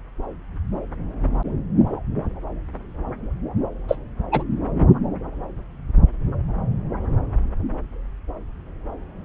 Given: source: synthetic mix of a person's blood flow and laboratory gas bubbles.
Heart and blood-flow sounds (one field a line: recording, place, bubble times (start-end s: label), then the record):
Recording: Doppler ultrasound of blood flow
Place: subclavian vein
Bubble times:
3.88-3.98 s: bubbles
4.32-4.43 s: bubbles
From the record:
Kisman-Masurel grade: 113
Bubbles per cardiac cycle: 1 to 2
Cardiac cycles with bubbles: 1 to 10%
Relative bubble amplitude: loud (0.450 to 0.775)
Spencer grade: 1 (occasional bubble signal discernible with the cardiac motion signal, with majority of cardiac periods free of bubbles)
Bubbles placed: anywhere in the cardiac cycle